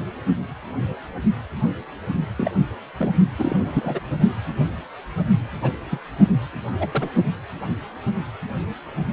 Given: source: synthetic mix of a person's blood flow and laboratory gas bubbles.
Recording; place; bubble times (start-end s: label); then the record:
Doppler ultrasound of blood flow; precordium
2.36-2.51 s: bubbles
2.99-3.11 s: bubbles
3.38-3.56 s: bubbles
3.58-4.00 s: bubbles
5.53-5.72 s: bubbles
5.90-5.99 s: bubbles
6.79-6.88 s: bubbles
6.92-7.10 s: bubbles
From the record:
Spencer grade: 2 (many but less than half of the cardiac periods contain bubble signals, singularly or in groups); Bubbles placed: only in the low amplitude regions of the cardiac cycle